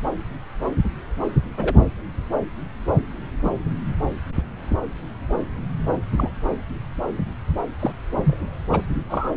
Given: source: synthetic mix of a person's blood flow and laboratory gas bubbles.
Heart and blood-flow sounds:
Doppler ultrasound of blood flow; subclavian vein
1.57-1.75 s: bubbles
3.44-3.50 s: bubbles
6.17-6.31 s: bubbles
7.79-7.93 s: bubbles
8.24-8.37 s: bubbles
8.71-8.81 s: bubbles
9.09-9.29 s: bubbles
From the record:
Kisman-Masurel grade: 122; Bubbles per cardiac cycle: 1 to 2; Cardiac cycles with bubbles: 10 to 50%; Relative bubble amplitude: moderate (0.250 to 0.450); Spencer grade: 2 (many but less than half of the cardiac periods contain bubble signals, singularly or in groups); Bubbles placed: anywhere in the cardiac cycle

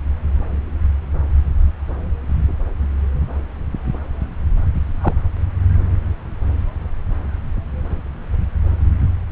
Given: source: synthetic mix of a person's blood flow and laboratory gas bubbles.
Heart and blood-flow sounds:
Doppler ultrasound of blood flow; subclavian vein
5.01-5.14 s: bubbles
From the record:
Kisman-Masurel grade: 112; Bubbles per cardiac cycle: 1 to 2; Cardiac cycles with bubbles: 1 to 10%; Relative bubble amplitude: moderate (0.250 to 0.450); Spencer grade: 1 (occasional bubble signal discernible with the cardiac motion signal, with majority of cardiac periods free of bubbles); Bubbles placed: anywhere in the cardiac cycle

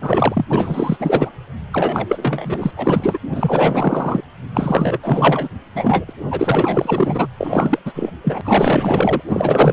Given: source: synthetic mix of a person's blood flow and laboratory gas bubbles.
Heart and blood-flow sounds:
Doppler ultrasound of blood flow; precordium
0.00-0.45 s: bubbles
0.49-0.97 s: bubbles
0.99-1.30 s: bubbles
1.72-2.71 s: bubbles
2.77-3.19 s: bubbles
3.32-4.21 s: bubbles
4.54-4.98 s: bubbles
5.03-5.49 s: bubbles
5.75-6.04 s: bubbles
6.08-6.13 s: bubbles
6.30-7.26 s: bubbles
7.38-7.79 s: bubbles
7.85-8.11 s: bubbles
8.23-8.41 s: bubbles
8.44-9.21 s: bubbles
9.27-9.73 s: bubbles
From the record:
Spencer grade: 4 (maximum detectable bubble signal sounding continuously throughout systole and diastole of every cardiac period, and overriding the amplitude of the normal cardiac signals); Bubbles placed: anywhere in the cardiac cycle

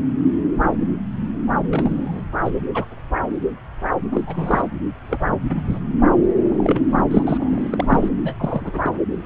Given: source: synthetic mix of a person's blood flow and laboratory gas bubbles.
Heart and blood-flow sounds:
Doppler ultrasound of blood flow; subclavian vein
1.70-2.23 s: bubbles
2.45-2.50 s: bubbles
2.74-2.84 s: bubbles
4.12-4.21 s: bubbles
4.26-4.66 s: bubbles
5.08-5.17 s: bubbles
5.50-5.55 s: bubbles
5.69-5.79 s: bubbles
6.51-6.83 s: bubbles
6.88-7.02 s: bubbles
7.10-7.22 s: bubbles
7.26-8.09 s: bubbles
8.24-8.35 s: bubbles
8.39-8.79 s: bubbles
8.84-8.93 s: bubbles
9.15-9.26 s: bubbles
From the record:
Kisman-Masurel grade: 232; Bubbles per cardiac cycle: several, 3 to 8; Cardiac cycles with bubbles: 50 to 99%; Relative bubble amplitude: moderate (0.250 to 0.450); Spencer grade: 3 (all of the cardiac periods contain showers or single bubble signals, but not dominating or overriding the cardiac motion signals); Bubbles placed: anywhere in the cardiac cycle

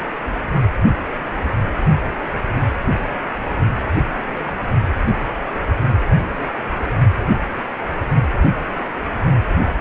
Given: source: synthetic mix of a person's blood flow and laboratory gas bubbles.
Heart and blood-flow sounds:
Doppler ultrasound of blood flow; precordium
4.45-4.56 s: bubbles
5.04-5.29 s: bubbles
5.50-5.55 s: bubbles
8.59-8.65 s: bubbles
8.68-8.71 s: bubbles
From the record:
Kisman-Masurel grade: 121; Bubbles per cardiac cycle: 1 to 2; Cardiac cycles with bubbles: 10 to 50%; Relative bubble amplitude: barely perceptible (0.100 to 0.250); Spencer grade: 2 (many but less than half of the cardiac periods contain bubble signals, singularly or in groups); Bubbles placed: only in the low amplitude regions of the cardiac cycle

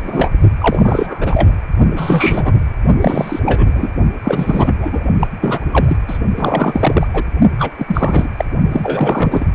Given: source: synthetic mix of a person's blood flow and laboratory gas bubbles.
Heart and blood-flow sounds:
Doppler ultrasound of blood flow; precordium
0.00-0.31 s: bubbles
0.59-1.52 s: bubbles
1.96-2.61 s: bubbles
3.00-3.40 s: bubbles
3.46-3.92 s: bubbles
4.24-5.04 s: bubbles
5.20-5.27 s: bubbles
5.41-5.64 s: bubbles
5.71-5.97 s: bubbles
6.08-6.18 s: bubbles
6.37-7.07 s: bubbles
7.13-7.24 s: bubbles
7.58-7.71 s: bubbles
7.78-8.28 s: bubbles
8.37-8.45 s: bubbles
8.71-9.46 s: bubbles
From the record:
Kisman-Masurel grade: 343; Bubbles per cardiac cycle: rolling drumbeat, 9 or more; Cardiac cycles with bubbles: 100%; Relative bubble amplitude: loud (0.450 to 0.775); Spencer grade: 3 (all of the cardiac periods contain showers or single bubble signals, but not dominating or overriding the cardiac motion signals); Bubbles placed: only in the low amplitude regions of the cardiac cycle

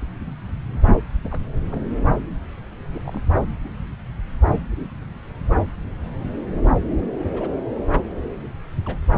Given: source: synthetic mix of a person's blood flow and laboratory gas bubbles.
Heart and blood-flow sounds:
Doppler ultrasound of blood flow; subclavian vein
1.31-1.41 s: bubbles
1.72-1.82 s: bubbles
2.93-3.20 s: bubbles
7.33-7.54 s: bubbles
8.42-8.48 s: bubbles
8.86-8.98 s: bubbles
From the record:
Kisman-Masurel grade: 121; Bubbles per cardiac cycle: 1 to 2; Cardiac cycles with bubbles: 10 to 50%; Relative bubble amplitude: barely perceptible (0.100 to 0.250); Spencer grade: 2 (many but less than half of the cardiac periods contain bubble signals, singularly or in groups); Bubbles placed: anywhere in the cardiac cycle

